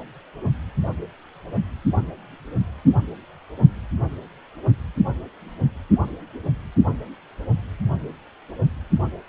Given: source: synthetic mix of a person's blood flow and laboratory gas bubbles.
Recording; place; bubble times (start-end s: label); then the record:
Doppler ultrasound of blood flow; precordium
no bubbles
From the record:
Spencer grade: 0 (complete lack of bubble signals)